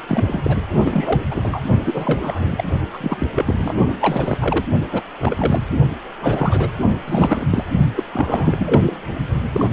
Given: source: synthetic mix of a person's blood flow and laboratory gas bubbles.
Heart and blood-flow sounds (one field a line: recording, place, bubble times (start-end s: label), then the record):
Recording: Doppler ultrasound of blood flow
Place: precordium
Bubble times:
0.08-0.57 s: bubbles
0.84-1.22 s: bubbles
1.31-1.60 s: bubbles
1.83-2.64 s: bubbles
2.93-2.98 s: bubbles
3.00-3.74 s: bubbles
4.00-4.66 s: bubbles
4.92-5.01 s: bubbles
5.19-5.64 s: bubbles
6.21-6.70 s: bubbles
7.07-7.67 s: bubbles
7.94-8.03 s: bubbles
8.13-8.96 s: bubbles
9.52-9.68 s: bubbles
From the record:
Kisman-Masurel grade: 342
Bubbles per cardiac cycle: rolling drumbeat, 9 or more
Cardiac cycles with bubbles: 100%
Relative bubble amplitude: moderate (0.250 to 0.450)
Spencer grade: 3 (all of the cardiac periods contain showers or single bubble signals, but not dominating or overriding the cardiac motion signals)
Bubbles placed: only in the low amplitude regions of the cardiac cycle